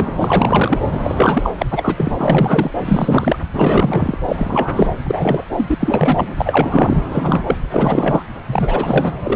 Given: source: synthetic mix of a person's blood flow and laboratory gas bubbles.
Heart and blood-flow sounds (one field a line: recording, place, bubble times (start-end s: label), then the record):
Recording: Doppler ultrasound of blood flow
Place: subclavian vein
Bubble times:
0.00-0.11 s: bubbles
0.20-0.82 s: bubbles
0.92-1.51 s: bubbles
1.58-1.66 s: bubbles
1.71-2.12 s: bubbles
2.18-2.71 s: bubbles
2.85-3.37 s: bubbles
3.52-4.17 s: bubbles
4.27-4.93 s: bubbles
5.05-5.42 s: bubbles
5.52-5.75 s: bubbles
5.80-6.34 s: bubbles
6.36-6.97 s: bubbles
7.10-7.42 s: bubbles
7.46-7.55 s: bubbles
7.72-8.22 s: bubbles
8.46-9.12 s: bubbles
9.24-9.36 s: bubbles
From the record:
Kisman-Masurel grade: 343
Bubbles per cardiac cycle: rolling drumbeat, 9 or more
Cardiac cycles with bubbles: 100%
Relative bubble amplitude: loud (0.450 to 0.775)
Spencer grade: 3 (all of the cardiac periods contain showers or single bubble signals, but not dominating or overriding the cardiac motion signals)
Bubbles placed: anywhere in the cardiac cycle